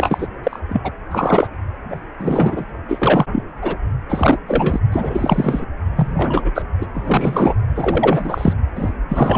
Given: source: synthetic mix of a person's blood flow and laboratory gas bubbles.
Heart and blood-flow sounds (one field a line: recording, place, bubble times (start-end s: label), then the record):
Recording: Doppler ultrasound of blood flow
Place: precordium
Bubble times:
0.00-0.28 s: bubbles
0.43-0.59 s: bubbles
0.69-0.81 s: bubbles
0.84-0.91 s: bubbles
1.11-1.48 s: bubbles
1.89-1.99 s: bubbles
2.19-2.65 s: bubbles
2.88-3.26 s: bubbles
3.31-3.43 s: bubbles
3.62-3.75 s: bubbles
4.09-4.38 s: bubbles
4.47-4.79 s: bubbles
4.92-5.65 s: bubbles
5.96-6.62 s: bubbles
6.81-6.86 s: bubbles
6.94-7.54 s: bubbles
7.75-8.54 s: bubbles
8.76-8.93 s: bubbles
9.09-9.38 s: bubbles
From the record:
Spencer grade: 3 (all of the cardiac periods contain showers or single bubble signals, but not dominating or overriding the cardiac motion signals)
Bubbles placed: only in the low amplitude regions of the cardiac cycle